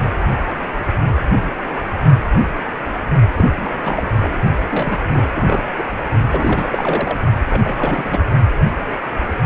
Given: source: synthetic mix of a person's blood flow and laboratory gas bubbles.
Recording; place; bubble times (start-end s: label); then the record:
Doppler ultrasound of blood flow; precordium
3.36-3.51 s: bubbles
3.56-4.09 s: bubbles
4.12-4.37 s: bubbles
4.71-5.08 s: bubbles
5.14-5.29 s: bubbles
5.34-5.63 s: bubbles
5.78-5.83 s: bubbles
6.31-7.18 s: bubbles
7.49-8.25 s: bubbles
From the record:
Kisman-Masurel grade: 332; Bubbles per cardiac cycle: rolling drumbeat, 9 or more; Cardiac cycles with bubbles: 50 to 99%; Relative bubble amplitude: moderate (0.250 to 0.450); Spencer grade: 3 (all of the cardiac periods contain showers or single bubble signals, but not dominating or overriding the cardiac motion signals); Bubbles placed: only in the low amplitude regions of the cardiac cycle